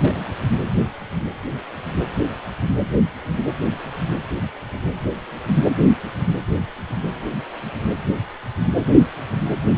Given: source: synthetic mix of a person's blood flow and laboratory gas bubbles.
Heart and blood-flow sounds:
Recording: Doppler ultrasound of blood flow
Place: precordium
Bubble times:
0.00-0.36 s: bubbles
From the record:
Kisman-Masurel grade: 211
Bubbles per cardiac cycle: several, 3 to 8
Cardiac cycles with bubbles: 1 to 10%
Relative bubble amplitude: barely perceptible (0.100 to 0.250)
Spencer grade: 1 (occasional bubble signal discernible with the cardiac motion signal, with majority of cardiac periods free of bubbles)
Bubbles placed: anywhere in the cardiac cycle

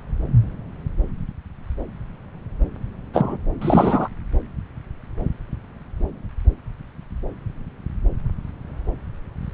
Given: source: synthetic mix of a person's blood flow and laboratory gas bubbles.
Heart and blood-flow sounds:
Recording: Doppler ultrasound of blood flow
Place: subclavian vein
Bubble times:
3.14-3.38 s: bubbles
3.61-4.08 s: bubbles
From the record:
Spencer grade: 2 (many but less than half of the cardiac periods contain bubble signals, singularly or in groups)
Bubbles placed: anywhere in the cardiac cycle

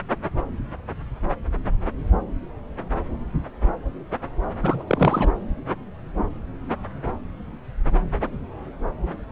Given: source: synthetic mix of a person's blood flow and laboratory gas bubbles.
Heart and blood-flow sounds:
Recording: Doppler ultrasound of blood flow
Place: subclavian vein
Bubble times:
4.62-4.83 s: bubbles
4.87-5.32 s: bubbles
From the record:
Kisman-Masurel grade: 212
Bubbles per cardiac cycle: several, 3 to 8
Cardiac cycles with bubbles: 1 to 10%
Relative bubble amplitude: moderate (0.250 to 0.450)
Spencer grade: 1 (occasional bubble signal discernible with the cardiac motion signal, with majority of cardiac periods free of bubbles)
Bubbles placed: anywhere in the cardiac cycle

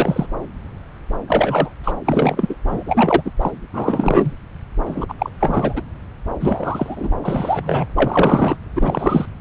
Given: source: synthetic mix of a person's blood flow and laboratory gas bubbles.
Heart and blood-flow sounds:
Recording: Doppler ultrasound of blood flow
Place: subclavian vein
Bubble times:
0.00-0.26 s: bubbles
1.28-1.70 s: bubbles
1.84-1.93 s: bubbles
2.05-2.55 s: bubbles
2.67-2.83 s: bubbles
2.86-3.22 s: bubbles
3.25-3.32 s: bubbles
3.40-3.51 s: bubbles
3.73-4.35 s: bubbles
4.86-5.15 s: bubbles
5.18-5.30 s: bubbles
5.40-5.82 s: bubbles
6.40-7.12 s: bubbles
7.23-7.87 s: bubbles
7.96-8.56 s: bubbles
8.75-9.25 s: bubbles
From the record:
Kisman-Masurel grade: 333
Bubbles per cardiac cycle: rolling drumbeat, 9 or more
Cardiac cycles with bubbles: 50 to 99%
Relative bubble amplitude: loud (0.450 to 0.775)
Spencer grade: 3 (all of the cardiac periods contain showers or single bubble signals, but not dominating or overriding the cardiac motion signals)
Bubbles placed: anywhere in the cardiac cycle

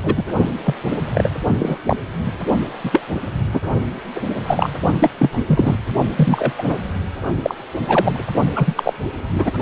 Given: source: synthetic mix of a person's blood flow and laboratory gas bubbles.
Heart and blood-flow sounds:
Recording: Doppler ultrasound of blood flow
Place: precordium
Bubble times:
0.02-0.24 s: bubbles
0.64-0.74 s: bubbles
1.15-1.30 s: bubbles
1.59-1.78 s: bubbles
1.83-1.97 s: bubbles
2.26-2.33 s: bubbles
2.83-3.03 s: bubbles
3.53-3.60 s: bubbles
4.14-4.21 s: bubbles
4.47-4.70 s: bubbles
4.98-5.10 s: bubbles
5.17-5.43 s: bubbles
5.46-5.76 s: bubbles
6.15-6.53 s: bubbles
6.57-6.62 s: bubbles
6.67-6.77 s: bubbles
7.43-7.54 s: bubbles
7.88-8.23 s: bubbles
8.55-8.93 s: bubbles
9.32-9.51 s: bubbles
From the record:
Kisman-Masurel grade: 243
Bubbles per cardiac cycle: several, 3 to 8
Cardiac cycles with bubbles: 100%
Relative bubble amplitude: loud (0.450 to 0.775)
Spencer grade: 3 (all of the cardiac periods contain showers or single bubble signals, but not dominating or overriding the cardiac motion signals)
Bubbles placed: only in the low amplitude regions of the cardiac cycle

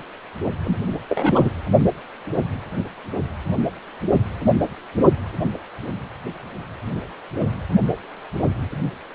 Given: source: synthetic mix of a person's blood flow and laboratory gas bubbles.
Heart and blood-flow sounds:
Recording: Doppler ultrasound of blood flow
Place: precordium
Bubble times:
0.64-0.76 s: bubbles
1.09-1.49 s: bubbles
From the record:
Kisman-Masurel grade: 223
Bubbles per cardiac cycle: several, 3 to 8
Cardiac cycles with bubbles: 10 to 50%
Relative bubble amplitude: loud (0.450 to 0.775)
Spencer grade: 2 (many but less than half of the cardiac periods contain bubble signals, singularly or in groups)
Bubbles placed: only in the low amplitude regions of the cardiac cycle

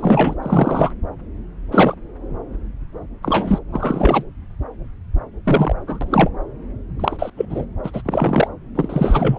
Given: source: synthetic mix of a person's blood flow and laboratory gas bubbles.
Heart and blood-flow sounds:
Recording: Doppler ultrasound of blood flow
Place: subclavian vein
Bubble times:
0.00-0.35 s: bubbles
0.42-0.90 s: bubbles
1.71-1.95 s: bubbles
3.23-3.59 s: bubbles
3.72-4.24 s: bubbles
5.45-5.75 s: bubbles
5.87-6.29 s: bubbles
6.99-7.30 s: bubbles
7.37-7.46 s: bubbles
7.49-7.66 s: bubbles
7.83-8.02 s: bubbles
8.05-8.47 s: bubbles
8.75-9.38 s: bubbles
From the record:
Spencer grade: 3 (all of the cardiac periods contain showers or single bubble signals, but not dominating or overriding the cardiac motion signals)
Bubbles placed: anywhere in the cardiac cycle

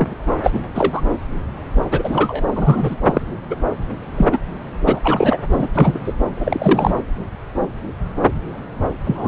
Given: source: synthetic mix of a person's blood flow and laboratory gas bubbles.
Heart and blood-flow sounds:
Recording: Doppler ultrasound of blood flow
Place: subclavian vein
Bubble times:
0.00-0.15 s: bubbles
0.43-0.60 s: bubbles
0.66-0.68 s: bubbles
0.75-1.02 s: bubbles
1.91-2.43 s: bubbles
2.55-2.96 s: bubbles
3.05-3.21 s: bubbles
3.50-3.56 s: bubbles
4.17-4.25 s: bubbles
4.32-4.38 s: bubbles
4.85-5.00 s: bubbles
5.04-5.38 s: bubbles
5.50-5.69 s: bubbles
5.74-5.99 s: bubbles
6.04-6.14 s: bubbles
6.36-6.94 s: bubbles
9.04-9.28 s: bubbles
From the record:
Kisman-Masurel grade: 233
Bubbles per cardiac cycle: several, 3 to 8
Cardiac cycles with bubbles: 50 to 99%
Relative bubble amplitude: loud (0.450 to 0.775)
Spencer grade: 3 (all of the cardiac periods contain showers or single bubble signals, but not dominating or overriding the cardiac motion signals)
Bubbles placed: anywhere in the cardiac cycle

